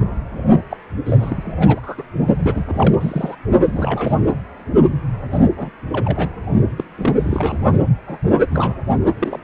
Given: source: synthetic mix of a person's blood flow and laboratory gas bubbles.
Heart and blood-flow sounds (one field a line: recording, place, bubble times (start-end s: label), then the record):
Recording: Doppler ultrasound of blood flow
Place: precordium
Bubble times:
0.00-0.14 s: bubbles
0.70-0.77 s: bubbles
1.05-1.80 s: bubbles
1.82-2.02 s: bubbles
2.34-2.64 s: bubbles
2.67-3.35 s: bubbles
3.65-4.18 s: bubbles
5.32-5.39 s: bubbles
5.57-5.71 s: bubbles
5.93-6.29 s: bubbles
6.78-6.84 s: bubbles
6.98-7.79 s: bubbles
8.08-8.18 s: bubbles
8.51-8.74 s: bubbles
9.19-9.39 s: bubbles
From the record:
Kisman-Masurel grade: 242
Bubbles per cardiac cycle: several, 3 to 8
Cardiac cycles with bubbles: 100%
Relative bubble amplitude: moderate (0.250 to 0.450)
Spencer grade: 3 (all of the cardiac periods contain showers or single bubble signals, but not dominating or overriding the cardiac motion signals)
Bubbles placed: only in the low amplitude regions of the cardiac cycle